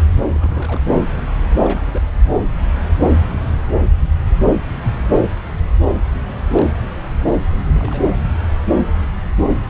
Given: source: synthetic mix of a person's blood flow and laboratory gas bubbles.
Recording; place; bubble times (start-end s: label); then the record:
Doppler ultrasound of blood flow; subclavian vein
0.30-0.82 s: bubbles
1.62-2.07 s: bubbles
6.12-6.25 s: bubbles
6.54-6.72 s: bubbles
7.62-8.20 s: bubbles
9.54-9.70 s: bubbles
From the record:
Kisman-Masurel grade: 221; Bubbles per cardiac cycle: several, 3 to 8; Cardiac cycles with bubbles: 10 to 50%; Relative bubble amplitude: barely perceptible (0.100 to 0.250); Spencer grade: 2 (many but less than half of the cardiac periods contain bubble signals, singularly or in groups); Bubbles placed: anywhere in the cardiac cycle